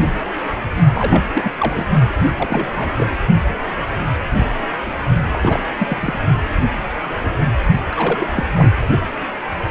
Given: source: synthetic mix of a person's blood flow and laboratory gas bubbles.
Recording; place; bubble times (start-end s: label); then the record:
Doppler ultrasound of blood flow; precordium
0.94-1.23 s: bubbles
1.33-1.51 s: bubbles
1.58-1.85 s: bubbles
2.17-2.28 s: bubbles
2.34-2.92 s: bubbles
2.96-3.07 s: bubbles
5.33-5.39 s: bubbles
5.43-5.60 s: bubbles
5.80-6.20 s: bubbles
7.92-8.28 s: bubbles
8.36-8.44 s: bubbles
8.55-8.71 s: bubbles
From the record:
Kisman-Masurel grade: 332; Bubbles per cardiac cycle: rolling drumbeat, 9 or more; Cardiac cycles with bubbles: 50 to 99%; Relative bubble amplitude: moderate (0.250 to 0.450); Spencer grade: 3 (all of the cardiac periods contain showers or single bubble signals, but not dominating or overriding the cardiac motion signals); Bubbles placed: only in the low amplitude regions of the cardiac cycle